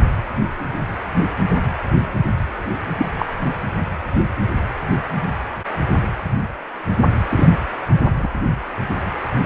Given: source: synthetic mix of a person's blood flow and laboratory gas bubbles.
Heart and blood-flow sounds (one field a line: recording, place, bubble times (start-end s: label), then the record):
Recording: Doppler ultrasound of blood flow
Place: precordium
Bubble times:
2.97-3.08 s: bubbles
3.18-3.26 s: bubbles
7.30-7.48 s: bubbles
8.19-8.28 s: bubbles
From the record:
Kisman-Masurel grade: 123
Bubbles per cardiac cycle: 1 to 2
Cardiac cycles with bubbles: 10 to 50%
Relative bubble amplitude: loud (0.450 to 0.775)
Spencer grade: 2 (many but less than half of the cardiac periods contain bubble signals, singularly or in groups)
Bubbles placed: anywhere in the cardiac cycle